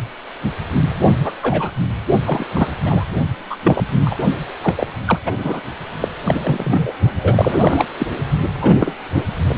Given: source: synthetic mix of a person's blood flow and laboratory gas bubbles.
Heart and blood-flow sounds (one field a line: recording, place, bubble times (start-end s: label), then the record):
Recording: Doppler ultrasound of blood flow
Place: precordium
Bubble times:
1.23-1.32 s: bubbles
1.43-1.70 s: bubbles
2.25-2.46 s: bubbles
2.52-2.76 s: bubbles
2.86-3.04 s: bubbles
3.50-3.56 s: bubbles
3.64-3.82 s: bubbles
4.04-4.19 s: bubbles
4.61-4.75 s: bubbles
4.78-4.86 s: bubbles
5.05-5.18 s: bubbles
5.25-5.32 s: bubbles
5.38-5.60 s: bubbles
6.01-6.08 s: bubbles
6.25-6.92 s: bubbles
7.21-7.86 s: bubbles
7.98-8.06 s: bubbles
8.61-8.73 s: bubbles
8.80-8.95 s: bubbles
9.13-9.25 s: bubbles
9.49-9.55 s: bubbles
From the record:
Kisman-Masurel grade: 233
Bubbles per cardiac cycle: several, 3 to 8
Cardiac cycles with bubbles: 50 to 99%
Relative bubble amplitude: loud (0.450 to 0.775)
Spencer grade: 3 (all of the cardiac periods contain showers or single bubble signals, but not dominating or overriding the cardiac motion signals)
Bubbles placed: only in the low amplitude regions of the cardiac cycle